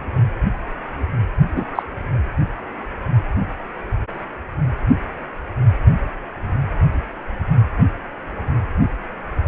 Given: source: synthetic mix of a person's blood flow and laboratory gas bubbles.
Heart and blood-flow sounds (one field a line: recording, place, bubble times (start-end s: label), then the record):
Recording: Doppler ultrasound of blood flow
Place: precordium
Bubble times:
1.54-1.64 s: bubbles
1.75-1.82 s: bubbles
From the record:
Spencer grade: 1 (occasional bubble signal discernible with the cardiac motion signal, with majority of cardiac periods free of bubbles)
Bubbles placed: anywhere in the cardiac cycle